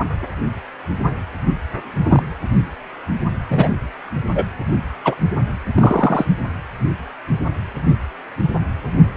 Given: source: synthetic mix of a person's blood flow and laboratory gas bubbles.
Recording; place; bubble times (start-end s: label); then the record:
Doppler ultrasound of blood flow; precordium
2.03-2.22 s: bubbles
3.50-3.69 s: bubbles
4.35-4.45 s: bubbles
5.04-5.15 s: bubbles
5.75-6.25 s: bubbles
7.86-7.95 s: bubbles
From the record:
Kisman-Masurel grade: 123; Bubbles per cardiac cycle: 1 to 2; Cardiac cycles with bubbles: 10 to 50%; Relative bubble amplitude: loud (0.450 to 0.775); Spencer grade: 2 (many but less than half of the cardiac periods contain bubble signals, singularly or in groups); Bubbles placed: anywhere in the cardiac cycle